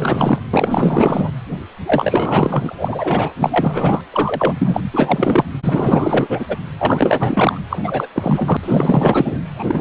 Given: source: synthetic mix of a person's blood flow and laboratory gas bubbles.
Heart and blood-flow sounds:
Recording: Doppler ultrasound of blood flow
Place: precordium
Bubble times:
0.00-0.39 s: bubbles
0.53-1.31 s: bubbles
1.85-3.33 s: bubbles
3.40-4.01 s: bubbles
4.12-4.54 s: bubbles
4.58-4.81 s: bubbles
4.93-5.44 s: bubbles
5.64-6.46 s: bubbles
6.49-6.57 s: bubbles
6.79-7.59 s: bubbles
7.70-7.79 s: bubbles
7.83-8.06 s: bubbles
8.12-8.57 s: bubbles
8.63-9.39 s: bubbles
9.47-9.81 s: bubbles
From the record:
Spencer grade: 4 (maximum detectable bubble signal sounding continuously throughout systole and diastole of every cardiac period, and overriding the amplitude of the normal cardiac signals)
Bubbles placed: anywhere in the cardiac cycle

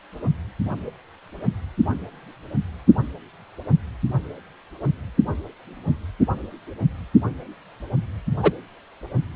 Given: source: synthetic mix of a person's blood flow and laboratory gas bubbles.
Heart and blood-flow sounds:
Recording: Doppler ultrasound of blood flow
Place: precordium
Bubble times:
8.43-8.52 s: bubbles
From the record:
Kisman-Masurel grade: 113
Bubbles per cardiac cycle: 1 to 2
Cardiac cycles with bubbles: 1 to 10%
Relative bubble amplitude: loud (0.450 to 0.775)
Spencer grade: 1 (occasional bubble signal discernible with the cardiac motion signal, with majority of cardiac periods free of bubbles)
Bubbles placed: only in the low amplitude regions of the cardiac cycle

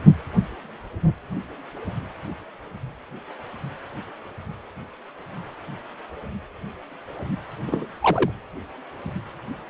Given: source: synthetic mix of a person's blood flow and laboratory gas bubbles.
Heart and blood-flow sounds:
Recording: Doppler ultrasound of blood flow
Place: precordium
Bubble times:
7.68-7.86 s: bubbles
8.01-8.31 s: bubbles
From the record:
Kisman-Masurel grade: 212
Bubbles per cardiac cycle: several, 3 to 8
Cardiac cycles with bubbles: 1 to 10%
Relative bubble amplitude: moderate (0.250 to 0.450)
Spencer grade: 1 (occasional bubble signal discernible with the cardiac motion signal, with majority of cardiac periods free of bubbles)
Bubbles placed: anywhere in the cardiac cycle

